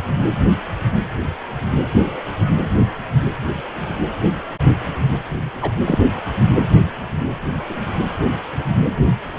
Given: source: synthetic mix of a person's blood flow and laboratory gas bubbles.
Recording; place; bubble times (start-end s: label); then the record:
Doppler ultrasound of blood flow; precordium
5.61-5.72 s: bubbles
5.86-5.99 s: bubbles
From the record:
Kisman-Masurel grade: 113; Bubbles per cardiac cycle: 1 to 2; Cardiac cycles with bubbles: 1 to 10%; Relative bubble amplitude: loud (0.450 to 0.775); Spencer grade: 1 (occasional bubble signal discernible with the cardiac motion signal, with majority of cardiac periods free of bubbles); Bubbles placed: anywhere in the cardiac cycle